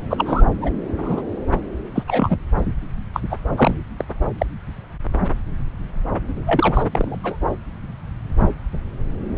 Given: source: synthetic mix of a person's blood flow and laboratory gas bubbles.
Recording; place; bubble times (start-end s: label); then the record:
Doppler ultrasound of blood flow; subclavian vein
0.10-0.43 s: bubbles
0.61-0.70 s: bubbles
0.98-1.22 s: bubbles
1.95-2.03 s: bubbles
2.07-2.37 s: bubbles
3.13-3.20 s: bubbles
3.30-3.37 s: bubbles
3.57-3.75 s: bubbles
3.98-4.04 s: bubbles
4.38-4.46 s: bubbles
6.46-6.83 s: bubbles
6.92-7.37 s: bubbles
From the record:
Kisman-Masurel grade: 232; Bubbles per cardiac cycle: several, 3 to 8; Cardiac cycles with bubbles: 50 to 99%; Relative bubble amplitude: moderate (0.250 to 0.450); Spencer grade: 3 (all of the cardiac periods contain showers or single bubble signals, but not dominating or overriding the cardiac motion signals); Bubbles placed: anywhere in the cardiac cycle